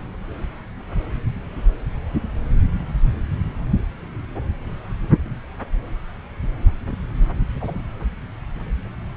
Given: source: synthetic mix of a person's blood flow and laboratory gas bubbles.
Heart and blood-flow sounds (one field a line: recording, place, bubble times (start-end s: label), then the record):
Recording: Doppler ultrasound of blood flow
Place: subclavian vein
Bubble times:
6.83-6.98 s: bubbles
7.60-7.80 s: bubbles
From the record:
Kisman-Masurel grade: 121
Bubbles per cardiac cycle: 1 to 2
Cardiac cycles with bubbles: 10 to 50%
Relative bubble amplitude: barely perceptible (0.100 to 0.250)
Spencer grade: 2 (many but less than half of the cardiac periods contain bubble signals, singularly or in groups)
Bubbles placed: anywhere in the cardiac cycle